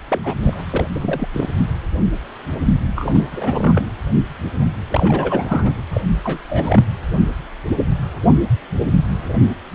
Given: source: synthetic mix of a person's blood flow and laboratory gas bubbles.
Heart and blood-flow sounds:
Doppler ultrasound of blood flow; precordium
0.08-0.61 s: bubbles
0.66-0.86 s: bubbles
0.93-1.28 s: bubbles
1.32-1.49 s: bubbles
2.96-3.85 s: bubbles
4.90-5.81 s: bubbles
5.91-6.01 s: bubbles
6.24-6.41 s: bubbles
6.49-6.83 s: bubbles
From the record:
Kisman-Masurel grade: 332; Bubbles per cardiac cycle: rolling drumbeat, 9 or more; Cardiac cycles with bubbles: 50 to 99%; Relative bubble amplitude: moderate (0.250 to 0.450); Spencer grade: 3 (all of the cardiac periods contain showers or single bubble signals, but not dominating or overriding the cardiac motion signals); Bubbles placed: anywhere in the cardiac cycle

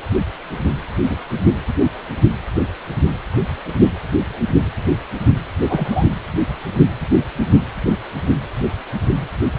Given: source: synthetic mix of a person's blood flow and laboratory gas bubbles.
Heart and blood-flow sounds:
Doppler ultrasound of blood flow; precordium
1.09-1.17 s: bubbles
5.69-6.08 s: bubbles
From the record:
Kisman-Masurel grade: 112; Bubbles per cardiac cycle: 1 to 2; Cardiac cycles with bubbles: 1 to 10%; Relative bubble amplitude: moderate (0.250 to 0.450); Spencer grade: 1 (occasional bubble signal discernible with the cardiac motion signal, with majority of cardiac periods free of bubbles); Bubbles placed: anywhere in the cardiac cycle

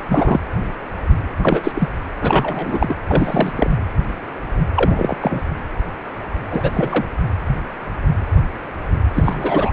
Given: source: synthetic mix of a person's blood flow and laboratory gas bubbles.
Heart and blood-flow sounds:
Doppler ultrasound of blood flow; precordium
0.09-0.40 s: bubbles
1.41-1.88 s: bubbles
2.21-2.96 s: bubbles
3.08-3.71 s: bubbles
4.75-5.17 s: bubbles
5.20-5.42 s: bubbles
6.50-7.04 s: bubbles
9.13-9.73 s: bubbles
From the record:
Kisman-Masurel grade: 233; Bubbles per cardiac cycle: several, 3 to 8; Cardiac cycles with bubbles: 50 to 99%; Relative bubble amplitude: loud (0.450 to 0.775); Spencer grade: 3 (all of the cardiac periods contain showers or single bubble signals, but not dominating or overriding the cardiac motion signals); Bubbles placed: anywhere in the cardiac cycle

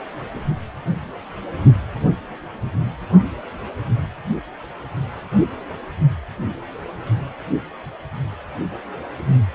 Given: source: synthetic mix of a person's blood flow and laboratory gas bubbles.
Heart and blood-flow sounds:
Doppler ultrasound of blood flow; precordium
no bubbles
From the record:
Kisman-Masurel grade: 000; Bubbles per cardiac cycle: 0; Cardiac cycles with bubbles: 0%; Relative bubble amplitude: no bubbles discernible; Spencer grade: 0 (complete lack of bubble signals)

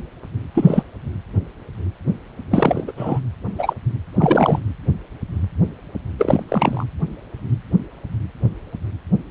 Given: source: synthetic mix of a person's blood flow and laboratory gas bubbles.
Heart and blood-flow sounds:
Doppler ultrasound of blood flow; precordium
0.54-0.83 s: bubbles
2.51-2.83 s: bubbles
2.87-2.92 s: bubbles
2.96-3.20 s: bubbles
3.58-3.74 s: bubbles
4.15-4.59 s: bubbles
6.18-6.43 s: bubbles
6.49-6.84 s: bubbles
From the record:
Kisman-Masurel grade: 223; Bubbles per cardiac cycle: several, 3 to 8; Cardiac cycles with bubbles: 10 to 50%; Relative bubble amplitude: loud (0.450 to 0.775); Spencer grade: 2 (many but less than half of the cardiac periods contain bubble signals, singularly or in groups); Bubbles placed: anywhere in the cardiac cycle

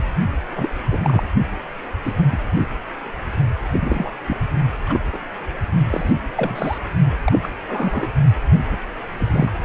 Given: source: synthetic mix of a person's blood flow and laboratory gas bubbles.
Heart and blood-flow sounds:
Doppler ultrasound of blood flow; precordium
0.55-0.69 s: bubbles
0.91-0.98 s: bubbles
1.03-1.27 s: bubbles
2.04-2.14 s: bubbles
2.31-2.36 s: bubbles
2.56-2.67 s: bubbles
3.72-4.12 s: bubbles
4.26-4.38 s: bubbles
4.86-4.99 s: bubbles
5.12-5.17 s: bubbles
5.89-6.13 s: bubbles
6.37-6.78 s: bubbles
7.25-7.39 s: bubbles
7.43-7.51 s: bubbles
7.67-8.09 s: bubbles
8.54-8.60 s: bubbles
8.71-8.77 s: bubbles
9.17-9.53 s: bubbles
From the record:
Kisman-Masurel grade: 242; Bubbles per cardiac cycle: several, 3 to 8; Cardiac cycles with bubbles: 100%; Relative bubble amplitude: moderate (0.250 to 0.450); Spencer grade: 3 (all of the cardiac periods contain showers or single bubble signals, but not dominating or overriding the cardiac motion signals); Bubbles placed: only in the low amplitude regions of the cardiac cycle

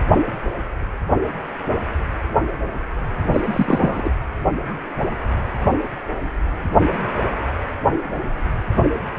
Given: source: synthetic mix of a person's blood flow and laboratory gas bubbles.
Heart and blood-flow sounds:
Doppler ultrasound of blood flow; precordium
3.33-3.41 s: bubbles
3.44-4.11 s: bubbles
From the record:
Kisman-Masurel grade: 213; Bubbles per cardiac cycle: several, 3 to 8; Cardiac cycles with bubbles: 1 to 10%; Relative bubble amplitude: loud (0.450 to 0.775); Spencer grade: 1 (occasional bubble signal discernible with the cardiac motion signal, with majority of cardiac periods free of bubbles); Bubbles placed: anywhere in the cardiac cycle

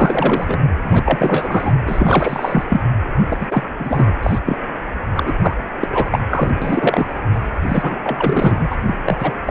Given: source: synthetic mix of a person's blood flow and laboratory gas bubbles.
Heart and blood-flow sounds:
Doppler ultrasound of blood flow; precordium
0.00-0.57 s: bubbles
0.83-1.72 s: bubbles
1.87-2.65 s: bubbles
2.69-2.80 s: bubbles
3.29-3.38 s: bubbles
3.40-3.46 s: bubbles
3.50-3.63 s: bubbles
3.79-4.13 s: bubbles
4.22-4.38 s: bubbles
4.45-4.58 s: bubbles
5.13-5.35 s: bubbles
5.41-5.54 s: bubbles
5.81-5.88 s: bubbles
5.91-6.20 s: bubbles
6.30-6.50 s: bubbles
6.62-7.20 s: bubbles
7.33-7.41 s: bubbles
7.68-7.99 s: bubbles
8.03-8.77 s: bubbles
8.87-8.98 s: bubbles
9.05-9.35 s: bubbles
9.46-9.51 s: bubbles
From the record:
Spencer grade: 3 (all of the cardiac periods contain showers or single bubble signals, but not dominating or overriding the cardiac motion signals); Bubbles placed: anywhere in the cardiac cycle

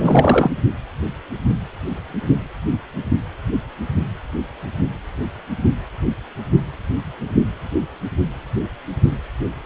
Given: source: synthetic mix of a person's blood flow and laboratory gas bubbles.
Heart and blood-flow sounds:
Doppler ultrasound of blood flow; precordium
0.00-0.51 s: bubbles
From the record:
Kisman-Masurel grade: 213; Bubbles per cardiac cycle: several, 3 to 8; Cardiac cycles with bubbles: 1 to 10%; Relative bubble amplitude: loud (0.450 to 0.775); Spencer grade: 1 (occasional bubble signal discernible with the cardiac motion signal, with majority of cardiac periods free of bubbles); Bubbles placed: only in the low amplitude regions of the cardiac cycle

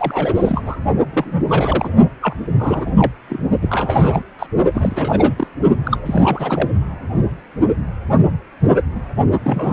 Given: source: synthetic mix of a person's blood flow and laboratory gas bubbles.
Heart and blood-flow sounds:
Doppler ultrasound of blood flow; precordium
0.00-0.63 s: bubbles
0.66-0.76 s: bubbles
1.13-1.90 s: bubbles
2.21-2.35 s: bubbles
2.58-2.92 s: bubbles
2.96-3.12 s: bubbles
3.29-3.38 s: bubbles
3.62-4.22 s: bubbles
4.38-4.46 s: bubbles
4.74-5.33 s: bubbles
5.36-5.47 s: bubbles
5.85-5.98 s: bubbles
6.05-6.70 s: bubbles
9.43-9.73 s: bubbles
From the record:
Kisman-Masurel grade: 332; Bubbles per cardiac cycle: rolling drumbeat, 9 or more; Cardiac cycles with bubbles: 50 to 99%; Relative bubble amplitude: moderate (0.250 to 0.450); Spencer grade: 3 (all of the cardiac periods contain showers or single bubble signals, but not dominating or overriding the cardiac motion signals); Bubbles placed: only in the low amplitude regions of the cardiac cycle

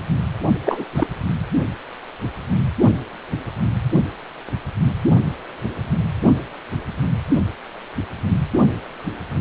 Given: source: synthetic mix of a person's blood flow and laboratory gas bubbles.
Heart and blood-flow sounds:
Doppler ultrasound of blood flow; precordium
0.65-0.84 s: bubbles
0.94-1.07 s: bubbles
From the record:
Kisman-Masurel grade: 213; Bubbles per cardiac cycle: several, 3 to 8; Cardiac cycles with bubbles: 1 to 10%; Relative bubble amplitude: loud (0.450 to 0.775); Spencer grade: 1 (occasional bubble signal discernible with the cardiac motion signal, with majority of cardiac periods free of bubbles); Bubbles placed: only in the low amplitude regions of the cardiac cycle

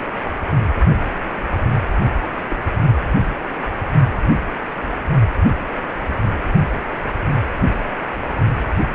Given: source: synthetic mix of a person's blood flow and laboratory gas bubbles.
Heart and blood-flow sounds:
Doppler ultrasound of blood flow; precordium
2.50-2.56 s: bubbles
From the record:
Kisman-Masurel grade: 121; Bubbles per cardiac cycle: 1 to 2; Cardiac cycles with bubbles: 10 to 50%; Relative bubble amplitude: barely perceptible (0.100 to 0.250); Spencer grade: 2 (many but less than half of the cardiac periods contain bubble signals, singularly or in groups); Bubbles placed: only in the low amplitude regions of the cardiac cycle

